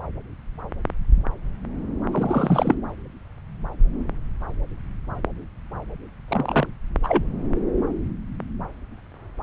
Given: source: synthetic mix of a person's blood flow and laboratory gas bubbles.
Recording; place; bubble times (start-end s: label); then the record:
Doppler ultrasound of blood flow; subclavian vein
2.12-2.75 s: bubbles
6.28-6.67 s: bubbles
7.03-7.23 s: bubbles
From the record:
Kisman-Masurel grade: 222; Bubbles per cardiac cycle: several, 3 to 8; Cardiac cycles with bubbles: 10 to 50%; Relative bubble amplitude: moderate (0.250 to 0.450); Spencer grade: 2 (many but less than half of the cardiac periods contain bubble signals, singularly or in groups); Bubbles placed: anywhere in the cardiac cycle